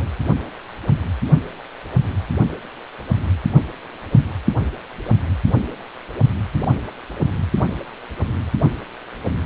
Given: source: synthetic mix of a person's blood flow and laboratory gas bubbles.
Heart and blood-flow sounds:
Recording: Doppler ultrasound of blood flow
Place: precordium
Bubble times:
0.00-0.03 s: bubbles
From the record:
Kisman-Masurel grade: 212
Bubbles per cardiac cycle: several, 3 to 8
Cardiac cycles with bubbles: 1 to 10%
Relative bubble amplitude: moderate (0.250 to 0.450)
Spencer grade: 1 (occasional bubble signal discernible with the cardiac motion signal, with majority of cardiac periods free of bubbles)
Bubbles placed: anywhere in the cardiac cycle

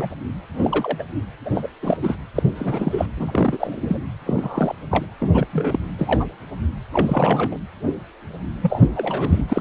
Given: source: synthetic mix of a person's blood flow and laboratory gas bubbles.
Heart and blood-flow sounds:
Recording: Doppler ultrasound of blood flow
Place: precordium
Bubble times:
0.00-0.10 s: bubbles
0.53-1.03 s: bubbles
1.45-1.50 s: bubbles
1.54-1.68 s: bubbles
1.82-1.97 s: bubbles
2.02-2.15 s: bubbles
2.35-2.43 s: bubbles
2.55-3.06 s: bubbles
3.17-3.98 s: bubbles
4.26-4.75 s: bubbles
4.90-5.05 s: bubbles
5.21-5.46 s: bubbles
5.53-5.79 s: bubbles
5.98-6.26 s: bubbles
6.93-7.57 s: bubbles
8.62-8.82 s: bubbles
8.96-9.45 s: bubbles
9.48-9.61 s: bubbles
From the record:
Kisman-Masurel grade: 232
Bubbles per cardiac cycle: several, 3 to 8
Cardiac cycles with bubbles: 50 to 99%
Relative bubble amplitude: moderate (0.250 to 0.450)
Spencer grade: 3 (all of the cardiac periods contain showers or single bubble signals, but not dominating or overriding the cardiac motion signals)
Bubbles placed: anywhere in the cardiac cycle

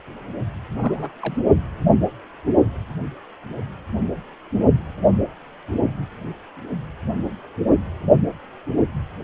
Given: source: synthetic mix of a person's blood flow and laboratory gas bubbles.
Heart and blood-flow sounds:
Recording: Doppler ultrasound of blood flow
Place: precordium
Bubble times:
0.72-1.10 s: bubbles
1.22-1.37 s: bubbles
From the record:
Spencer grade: 1 (occasional bubble signal discernible with the cardiac motion signal, with majority of cardiac periods free of bubbles)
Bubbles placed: only in the low amplitude regions of the cardiac cycle

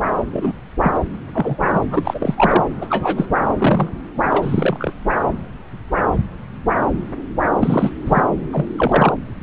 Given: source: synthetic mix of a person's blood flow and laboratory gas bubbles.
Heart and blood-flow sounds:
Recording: Doppler ultrasound of blood flow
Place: subclavian vein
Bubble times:
0.31-0.53 s: bubbles
0.80-0.99 s: bubbles
1.14-1.17 s: bubbles
1.33-1.80 s: bubbles
1.90-2.64 s: bubbles
2.81-2.87 s: bubbles
2.90-3.27 s: bubbles
3.58-3.90 s: bubbles
4.30-4.94 s: bubbles
7.55-7.92 s: bubbles
8.05-8.21 s: bubbles
8.53-8.66 s: bubbles
8.77-9.13 s: bubbles
From the record:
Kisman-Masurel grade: 233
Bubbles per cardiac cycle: several, 3 to 8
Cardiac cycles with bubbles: 50 to 99%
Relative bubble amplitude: loud (0.450 to 0.775)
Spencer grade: 3 (all of the cardiac periods contain showers or single bubble signals, but not dominating or overriding the cardiac motion signals)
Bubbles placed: anywhere in the cardiac cycle

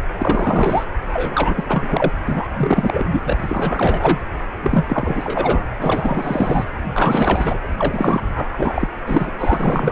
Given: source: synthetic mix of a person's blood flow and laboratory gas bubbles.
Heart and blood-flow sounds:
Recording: Doppler ultrasound of blood flow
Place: precordium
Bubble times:
0.17-0.84 s: bubbles
1.13-1.64 s: bubbles
1.68-2.11 s: bubbles
2.27-2.48 s: bubbles
2.57-3.04 s: bubbles
3.11-4.20 s: bubbles
4.62-5.64 s: bubbles
5.79-6.65 s: bubbles
6.95-7.58 s: bubbles
7.77-8.50 s: bubbles
8.57-8.88 s: bubbles
9.06-9.32 s: bubbles
9.38-9.92 s: bubbles
From the record:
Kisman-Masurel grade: 343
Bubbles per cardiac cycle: rolling drumbeat, 9 or more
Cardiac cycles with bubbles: 100%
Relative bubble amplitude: loud (0.450 to 0.775)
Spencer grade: 3 (all of the cardiac periods contain showers or single bubble signals, but not dominating or overriding the cardiac motion signals)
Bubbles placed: anywhere in the cardiac cycle

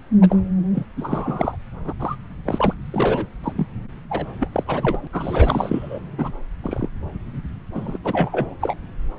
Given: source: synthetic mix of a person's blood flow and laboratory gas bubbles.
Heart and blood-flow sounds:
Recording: Doppler ultrasound of blood flow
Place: subclavian vein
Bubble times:
0.20-0.35 s: bubbles
0.74-0.86 s: bubbles
0.96-1.56 s: bubbles
1.85-1.93 s: bubbles
2.00-2.17 s: bubbles
2.46-2.74 s: bubbles
2.91-3.26 s: bubbles
3.43-3.53 s: bubbles
3.56-3.67 s: bubbles
4.09-4.26 s: bubbles
4.39-4.48 s: bubbles
4.52-4.63 s: bubbles
4.67-5.07 s: bubbles
5.12-6.01 s: bubbles
6.18-6.31 s: bubbles
6.62-6.88 s: bubbles
7.75-7.98 s: bubbles
8.04-8.55 s: bubbles
8.61-8.75 s: bubbles
From the record:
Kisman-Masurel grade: 242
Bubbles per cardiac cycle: several, 3 to 8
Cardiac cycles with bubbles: 100%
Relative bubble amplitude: moderate (0.250 to 0.450)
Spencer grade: 3 (all of the cardiac periods contain showers or single bubble signals, but not dominating or overriding the cardiac motion signals)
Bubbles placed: anywhere in the cardiac cycle

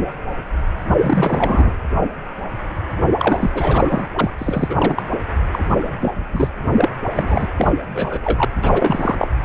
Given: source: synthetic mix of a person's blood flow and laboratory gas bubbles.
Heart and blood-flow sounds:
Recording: Doppler ultrasound of blood flow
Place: precordium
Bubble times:
1.00-1.76 s: bubbles
2.98-3.08 s: bubbles
3.19-3.50 s: bubbles
3.54-4.09 s: bubbles
4.18-4.30 s: bubbles
4.38-5.02 s: bubbles
5.52-5.95 s: bubbles
6.00-6.14 s: bubbles
6.32-6.49 s: bubbles
6.76-6.89 s: bubbles
7.15-7.46 s: bubbles
7.57-7.73 s: bubbles
7.94-8.20 s: bubbles
8.22-8.45 s: bubbles
8.55-9.15 s: bubbles
9.19-9.28 s: bubbles
From the record:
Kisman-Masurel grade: 333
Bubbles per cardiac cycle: rolling drumbeat, 9 or more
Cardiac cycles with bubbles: 50 to 99%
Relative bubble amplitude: loud (0.450 to 0.775)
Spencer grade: 3 (all of the cardiac periods contain showers or single bubble signals, but not dominating or overriding the cardiac motion signals)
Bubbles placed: anywhere in the cardiac cycle

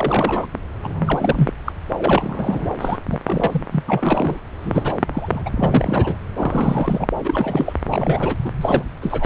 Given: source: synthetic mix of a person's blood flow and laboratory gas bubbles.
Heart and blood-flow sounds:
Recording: Doppler ultrasound of blood flow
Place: subclavian vein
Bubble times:
0.00-0.47 s: bubbles
0.82-1.53 s: bubbles
1.65-1.72 s: bubbles
1.97-2.70 s: bubbles
2.80-2.98 s: bubbles
3.10-3.19 s: bubbles
3.26-3.61 s: bubbles
3.72-3.83 s: bubbles
3.87-4.37 s: bubbles
4.62-4.95 s: bubbles
5.12-5.42 s: bubbles
5.46-6.15 s: bubbles
6.37-7.08 s: bubbles
7.24-7.73 s: bubbles
7.85-8.36 s: bubbles
8.44-8.50 s: bubbles
8.61-8.84 s: bubbles
9.01-9.26 s: bubbles
From the record:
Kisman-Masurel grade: 342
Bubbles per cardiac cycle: rolling drumbeat, 9 or more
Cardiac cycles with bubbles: 100%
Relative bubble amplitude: moderate (0.250 to 0.450)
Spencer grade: 3 (all of the cardiac periods contain showers or single bubble signals, but not dominating or overriding the cardiac motion signals)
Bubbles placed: anywhere in the cardiac cycle

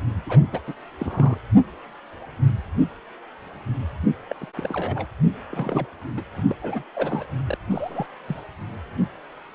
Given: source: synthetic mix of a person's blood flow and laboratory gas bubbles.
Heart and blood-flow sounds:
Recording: Doppler ultrasound of blood flow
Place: precordium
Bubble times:
0.27-0.40 s: bubbles
0.53-0.60 s: bubbles
0.67-0.74 s: bubbles
0.99-1.38 s: bubbles
4.29-4.35 s: bubbles
4.41-4.46 s: bubbles
4.56-5.06 s: bubbles
5.52-5.88 s: bubbles
6.17-6.21 s: bubbles
6.36-6.42 s: bubbles
6.49-6.56 s: bubbles
6.62-6.83 s: bubbles
6.95-7.25 s: bubbles
7.47-7.57 s: bubbles
7.70-8.06 s: bubbles
8.28-8.43 s: bubbles
From the record:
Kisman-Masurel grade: 221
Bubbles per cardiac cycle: several, 3 to 8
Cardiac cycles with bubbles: 10 to 50%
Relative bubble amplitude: barely perceptible (0.100 to 0.250)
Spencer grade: 2 (many but less than half of the cardiac periods contain bubble signals, singularly or in groups)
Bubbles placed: anywhere in the cardiac cycle

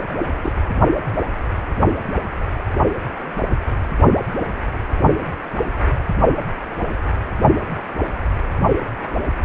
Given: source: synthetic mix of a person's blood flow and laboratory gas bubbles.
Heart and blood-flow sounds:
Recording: Doppler ultrasound of blood flow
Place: precordium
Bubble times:
0.42-0.52 s: bubbles
From the record:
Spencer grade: 1 (occasional bubble signal discernible with the cardiac motion signal, with majority of cardiac periods free of bubbles)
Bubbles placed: only in the low amplitude regions of the cardiac cycle

